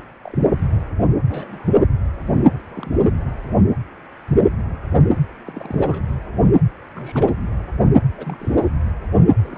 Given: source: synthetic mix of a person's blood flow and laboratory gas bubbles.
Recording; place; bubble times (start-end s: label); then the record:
Doppler ultrasound of blood flow; precordium
0.25-0.51 s: bubbles
1.29-1.79 s: bubbles
2.68-3.09 s: bubbles
5.46-6.04 s: bubbles
6.94-7.33 s: bubbles
8.18-8.70 s: bubbles
9.38-9.58 s: bubbles
From the record:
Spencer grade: 2 (many but less than half of the cardiac periods contain bubble signals, singularly or in groups); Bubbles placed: anywhere in the cardiac cycle